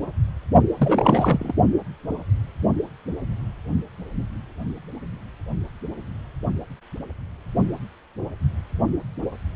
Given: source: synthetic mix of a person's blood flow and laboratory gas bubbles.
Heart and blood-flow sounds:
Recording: Doppler ultrasound of blood flow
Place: precordium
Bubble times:
0.77-1.54 s: bubbles
From the record:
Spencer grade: 1 (occasional bubble signal discernible with the cardiac motion signal, with majority of cardiac periods free of bubbles)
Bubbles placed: only in the low amplitude regions of the cardiac cycle

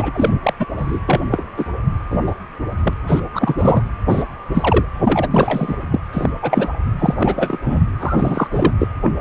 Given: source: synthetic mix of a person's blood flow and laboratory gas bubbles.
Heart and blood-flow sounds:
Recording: Doppler ultrasound of blood flow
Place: precordium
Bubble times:
0.00-0.39 s: bubbles
0.43-0.53 s: bubbles
0.59-0.66 s: bubbles
0.78-0.99 s: bubbles
1.06-1.21 s: bubbles
1.31-1.46 s: bubbles
1.56-1.66 s: bubbles
2.10-2.35 s: bubbles
2.83-2.94 s: bubbles
3.07-3.20 s: bubbles
3.33-3.83 s: bubbles
4.05-4.24 s: bubbles
4.54-4.86 s: bubbles
5.03-5.75 s: bubbles
5.92-6.00 s: bubbles
6.12-6.30 s: bubbles
6.42-6.70 s: bubbles
6.99-7.59 s: bubbles
7.64-7.83 s: bubbles
8.00-8.47 s: bubbles
8.51-8.73 s: bubbles
8.79-8.88 s: bubbles
9.03-9.11 s: bubbles
9.17-9.21 s: bubbles
From the record:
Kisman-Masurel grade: 243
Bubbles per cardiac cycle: several, 3 to 8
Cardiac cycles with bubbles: 100%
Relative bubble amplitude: loud (0.450 to 0.775)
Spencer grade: 3 (all of the cardiac periods contain showers or single bubble signals, but not dominating or overriding the cardiac motion signals)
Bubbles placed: anywhere in the cardiac cycle

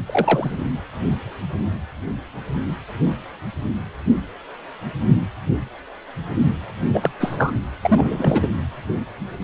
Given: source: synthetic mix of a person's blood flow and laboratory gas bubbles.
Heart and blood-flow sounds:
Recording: Doppler ultrasound of blood flow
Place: precordium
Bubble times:
0.06-0.57 s: bubbles
6.94-7.11 s: bubbles
7.20-7.54 s: bubbles
7.83-8.48 s: bubbles
From the record:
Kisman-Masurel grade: 223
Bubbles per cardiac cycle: several, 3 to 8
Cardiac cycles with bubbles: 10 to 50%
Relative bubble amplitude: loud (0.450 to 0.775)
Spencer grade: 2 (many but less than half of the cardiac periods contain bubble signals, singularly or in groups)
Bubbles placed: anywhere in the cardiac cycle

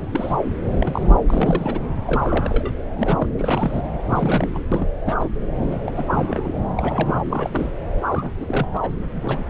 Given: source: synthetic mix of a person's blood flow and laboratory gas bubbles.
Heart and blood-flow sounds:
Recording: Doppler ultrasound of blood flow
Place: subclavian vein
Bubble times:
0.00-0.36 s: bubbles
0.80-1.17 s: bubbles
1.26-1.86 s: bubbles
2.05-2.73 s: bubbles
2.97-3.27 s: bubbles
3.37-3.81 s: bubbles
4.08-4.66 s: bubbles
4.71-4.88 s: bubbles
5.05-5.29 s: bubbles
5.71-5.77 s: bubbles
5.84-5.92 s: bubbles
5.96-6.05 s: bubbles
6.08-6.53 s: bubbles
6.75-7.23 s: bubbles
7.29-7.72 s: bubbles
8.08-8.32 s: bubbles
8.35-8.68 s: bubbles
8.73-8.77 s: bubbles
8.82-8.90 s: bubbles
9.09-9.45 s: bubbles
From the record:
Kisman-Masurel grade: 242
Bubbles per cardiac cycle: several, 3 to 8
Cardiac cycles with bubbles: 100%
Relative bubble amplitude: moderate (0.250 to 0.450)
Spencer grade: 3 (all of the cardiac periods contain showers or single bubble signals, but not dominating or overriding the cardiac motion signals)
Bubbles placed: anywhere in the cardiac cycle

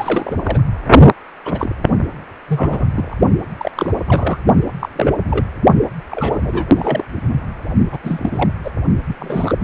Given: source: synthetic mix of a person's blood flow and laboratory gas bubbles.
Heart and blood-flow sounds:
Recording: Doppler ultrasound of blood flow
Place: precordium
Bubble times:
0.00-0.63 s: bubbles
1.45-1.75 s: bubbles
2.48-2.86 s: bubbles
2.96-3.15 s: bubbles
3.58-3.71 s: bubbles
3.75-3.92 s: bubbles
4.04-4.38 s: bubbles
4.80-4.88 s: bubbles
4.96-5.15 s: bubbles
5.29-5.45 s: bubbles
6.11-7.05 s: bubbles
7.92-7.98 s: bubbles
8.04-8.51 s: bubbles
8.64-8.71 s: bubbles
9.07-9.16 s: bubbles
9.20-9.56 s: bubbles
From the record:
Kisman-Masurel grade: 232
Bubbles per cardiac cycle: several, 3 to 8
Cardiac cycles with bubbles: 50 to 99%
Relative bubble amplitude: moderate (0.250 to 0.450)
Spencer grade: 3 (all of the cardiac periods contain showers or single bubble signals, but not dominating or overriding the cardiac motion signals)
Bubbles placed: only in the low amplitude regions of the cardiac cycle

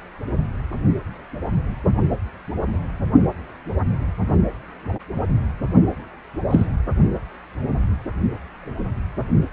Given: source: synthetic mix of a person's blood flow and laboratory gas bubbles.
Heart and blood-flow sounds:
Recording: Doppler ultrasound of blood flow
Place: precordium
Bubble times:
6.50-6.66 s: bubbles
From the record:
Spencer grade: 2 (many but less than half of the cardiac periods contain bubble signals, singularly or in groups)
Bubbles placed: only in the low amplitude regions of the cardiac cycle

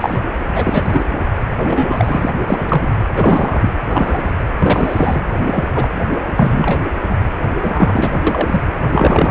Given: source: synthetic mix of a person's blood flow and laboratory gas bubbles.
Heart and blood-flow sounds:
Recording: Doppler ultrasound of blood flow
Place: precordium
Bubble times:
0.01-0.18 s: bubbles
0.52-1.02 s: bubbles
1.59-2.30 s: bubbles
2.47-2.88 s: bubbles
3.14-3.71 s: bubbles
3.89-4.31 s: bubbles
4.58-5.23 s: bubbles
5.45-5.64 s: bubbles
5.75-5.88 s: bubbles
6.36-6.88 s: bubbles
7.61-8.60 s: bubbles
8.92-9.31 s: bubbles
From the record:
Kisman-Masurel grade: 243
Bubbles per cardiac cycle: several, 3 to 8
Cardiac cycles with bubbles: 100%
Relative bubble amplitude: loud (0.450 to 0.775)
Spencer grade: 3 (all of the cardiac periods contain showers or single bubble signals, but not dominating or overriding the cardiac motion signals)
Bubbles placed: anywhere in the cardiac cycle

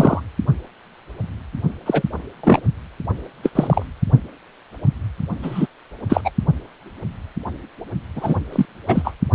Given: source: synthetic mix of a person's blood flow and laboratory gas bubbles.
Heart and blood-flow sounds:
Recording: Doppler ultrasound of blood flow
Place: precordium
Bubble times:
0.00-0.21 s: bubbles
1.86-2.03 s: bubbles
2.43-2.60 s: bubbles
3.43-3.50 s: bubbles
3.55-3.83 s: bubbles
5.42-5.67 s: bubbles
6.09-6.21 s: bubbles
6.25-6.31 s: bubbles
8.15-8.38 s: bubbles
8.52-8.65 s: bubbles
8.88-9.14 s: bubbles
From the record:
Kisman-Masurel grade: 233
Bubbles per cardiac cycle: several, 3 to 8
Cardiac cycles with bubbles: 50 to 99%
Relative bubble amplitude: loud (0.450 to 0.775)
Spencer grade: 3 (all of the cardiac periods contain showers or single bubble signals, but not dominating or overriding the cardiac motion signals)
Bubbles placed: only in the low amplitude regions of the cardiac cycle

